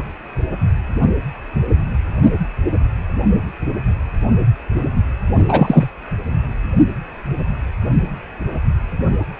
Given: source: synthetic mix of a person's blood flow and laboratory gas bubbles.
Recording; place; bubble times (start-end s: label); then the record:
Doppler ultrasound of blood flow; precordium
5.38-5.86 s: bubbles
From the record:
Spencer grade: 1 (occasional bubble signal discernible with the cardiac motion signal, with majority of cardiac periods free of bubbles); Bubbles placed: anywhere in the cardiac cycle